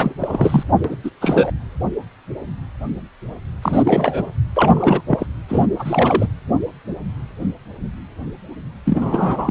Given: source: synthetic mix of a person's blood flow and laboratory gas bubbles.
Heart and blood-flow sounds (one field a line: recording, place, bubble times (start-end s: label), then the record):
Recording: Doppler ultrasound of blood flow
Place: precordium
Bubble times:
0.00-0.13 s: bubbles
0.20-0.63 s: bubbles
0.84-0.96 s: bubbles
1.04-1.10 s: bubbles
1.21-1.52 s: bubbles
3.62-4.25 s: bubbles
4.56-5.01 s: bubbles
5.07-5.26 s: bubbles
5.49-5.67 s: bubbles
5.79-6.28 s: bubbles
8.85-9.50 s: bubbles
From the record:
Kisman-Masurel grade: 333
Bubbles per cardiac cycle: rolling drumbeat, 9 or more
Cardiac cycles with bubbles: 50 to 99%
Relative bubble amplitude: loud (0.450 to 0.775)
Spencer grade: 3 (all of the cardiac periods contain showers or single bubble signals, but not dominating or overriding the cardiac motion signals)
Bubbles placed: anywhere in the cardiac cycle